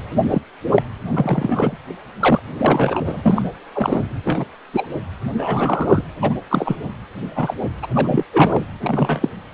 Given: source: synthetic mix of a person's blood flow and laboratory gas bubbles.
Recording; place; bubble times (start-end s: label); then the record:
Doppler ultrasound of blood flow; precordium
0.23-0.41 s: bubbles
0.75-0.82 s: bubbles
1.11-1.77 s: bubbles
2.19-2.40 s: bubbles
2.58-3.00 s: bubbles
3.05-3.42 s: bubbles
3.75-4.02 s: bubbles
4.24-4.45 s: bubbles
4.73-4.87 s: bubbles
5.38-6.05 s: bubbles
6.22-6.35 s: bubbles
6.50-6.77 s: bubbles
7.35-7.54 s: bubbles
7.82-7.87 s: bubbles
7.95-8.24 s: bubbles
8.32-8.64 s: bubbles
8.80-9.29 s: bubbles
From the record:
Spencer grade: 3 (all of the cardiac periods contain showers or single bubble signals, but not dominating or overriding the cardiac motion signals); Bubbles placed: anywhere in the cardiac cycle